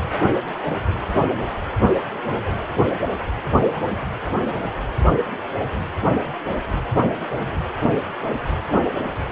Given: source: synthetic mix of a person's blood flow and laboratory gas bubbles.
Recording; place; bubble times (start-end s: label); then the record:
Doppler ultrasound of blood flow; precordium
no bubbles
From the record:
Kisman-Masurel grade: 000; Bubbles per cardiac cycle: 0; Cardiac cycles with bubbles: 0%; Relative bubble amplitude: no bubbles discernible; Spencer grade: 0 (complete lack of bubble signals)